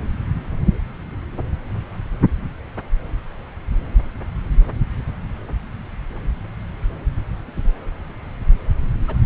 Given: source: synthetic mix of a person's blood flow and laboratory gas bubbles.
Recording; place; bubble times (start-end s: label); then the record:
Doppler ultrasound of blood flow; subclavian vein
9.07-9.17 s: bubbles
From the record:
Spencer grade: 1 (occasional bubble signal discernible with the cardiac motion signal, with majority of cardiac periods free of bubbles); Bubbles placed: anywhere in the cardiac cycle